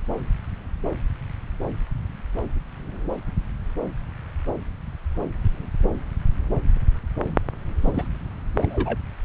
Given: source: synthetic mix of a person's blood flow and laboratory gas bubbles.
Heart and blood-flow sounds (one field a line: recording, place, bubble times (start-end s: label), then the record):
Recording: Doppler ultrasound of blood flow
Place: subclavian vein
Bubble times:
7.83-8.07 s: bubbles
8.57-8.98 s: bubbles
From the record:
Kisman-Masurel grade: 221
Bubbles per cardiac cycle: several, 3 to 8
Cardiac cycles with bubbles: 10 to 50%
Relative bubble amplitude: barely perceptible (0.100 to 0.250)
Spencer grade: 2 (many but less than half of the cardiac periods contain bubble signals, singularly or in groups)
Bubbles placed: anywhere in the cardiac cycle